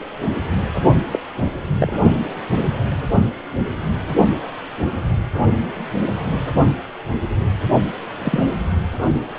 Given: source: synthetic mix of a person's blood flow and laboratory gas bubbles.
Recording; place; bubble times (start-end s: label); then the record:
Doppler ultrasound of blood flow; precordium
1.11-1.19 s: bubbles
1.78-1.97 s: bubbles
6.04-6.08 s: bubbles
6.32-6.42 s: bubbles
8.18-8.46 s: bubbles
From the record:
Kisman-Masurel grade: 122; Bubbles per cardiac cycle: 1 to 2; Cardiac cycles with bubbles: 10 to 50%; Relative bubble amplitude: moderate (0.250 to 0.450); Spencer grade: 2 (many but less than half of the cardiac periods contain bubble signals, singularly or in groups); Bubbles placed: only in the low amplitude regions of the cardiac cycle